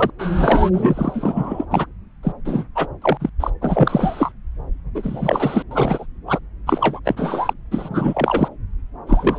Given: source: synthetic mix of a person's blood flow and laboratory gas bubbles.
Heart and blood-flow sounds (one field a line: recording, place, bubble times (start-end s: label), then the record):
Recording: Doppler ultrasound of blood flow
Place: subclavian vein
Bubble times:
0.00-0.10 s: bubbles
0.19-1.66 s: bubbles
1.70-1.86 s: bubbles
2.23-2.32 s: bubbles
2.45-2.65 s: bubbles
2.75-2.87 s: bubbles
3.02-3.29 s: bubbles
3.40-3.50 s: bubbles
3.61-4.32 s: bubbles
4.95-5.62 s: bubbles
5.71-6.06 s: bubbles
6.27-6.39 s: bubbles
6.66-6.99 s: bubbles
7.04-7.54 s: bubbles
7.71-8.48 s: bubbles
9.07-9.39 s: bubbles
From the record:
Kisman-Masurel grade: 343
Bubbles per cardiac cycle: rolling drumbeat, 9 or more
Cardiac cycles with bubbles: 100%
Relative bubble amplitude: loud (0.450 to 0.775)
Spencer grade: 3 (all of the cardiac periods contain showers or single bubble signals, but not dominating or overriding the cardiac motion signals)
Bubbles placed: anywhere in the cardiac cycle